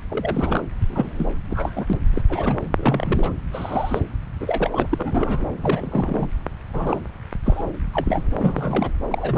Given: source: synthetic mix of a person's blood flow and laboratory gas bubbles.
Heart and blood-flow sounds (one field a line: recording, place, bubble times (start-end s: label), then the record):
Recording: Doppler ultrasound of blood flow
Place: subclavian vein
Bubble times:
0.10-0.64 s: bubbles
0.89-1.07 s: bubbles
1.18-1.27 s: bubbles
1.49-1.99 s: bubbles
2.15-2.22 s: bubbles
2.29-2.60 s: bubbles
2.75-3.32 s: bubbles
3.53-4.00 s: bubbles
4.40-5.46 s: bubbles
5.62-6.28 s: bubbles
6.73-7.00 s: bubbles
7.45-7.66 s: bubbles
7.74-7.78 s: bubbles
7.93-8.23 s: bubbles
8.31-8.91 s: bubbles
9.10-9.38 s: bubbles
From the record:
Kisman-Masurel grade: 242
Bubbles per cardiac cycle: several, 3 to 8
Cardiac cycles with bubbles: 100%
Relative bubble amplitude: moderate (0.250 to 0.450)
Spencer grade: 3 (all of the cardiac periods contain showers or single bubble signals, but not dominating or overriding the cardiac motion signals)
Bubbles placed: anywhere in the cardiac cycle